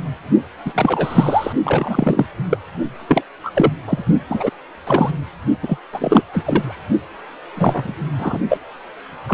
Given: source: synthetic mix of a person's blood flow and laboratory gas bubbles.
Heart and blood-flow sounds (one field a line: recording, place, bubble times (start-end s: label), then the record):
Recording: Doppler ultrasound of blood flow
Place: precordium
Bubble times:
0.65-1.52 s: bubbles
1.64-2.26 s: bubbles
2.50-2.57 s: bubbles
3.08-3.22 s: bubbles
3.44-3.50 s: bubbles
3.54-3.71 s: bubbles
3.87-4.04 s: bubbles
4.29-4.50 s: bubbles
4.87-5.11 s: bubbles
5.62-5.78 s: bubbles
5.92-6.22 s: bubbles
6.33-6.82 s: bubbles
7.55-7.95 s: bubbles
8.18-8.38 s: bubbles
8.48-8.58 s: bubbles
9.27-9.34 s: bubbles
From the record:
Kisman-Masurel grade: 243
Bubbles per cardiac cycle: several, 3 to 8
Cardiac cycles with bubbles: 100%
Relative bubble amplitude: loud (0.450 to 0.775)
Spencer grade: 3 (all of the cardiac periods contain showers or single bubble signals, but not dominating or overriding the cardiac motion signals)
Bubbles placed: only in the low amplitude regions of the cardiac cycle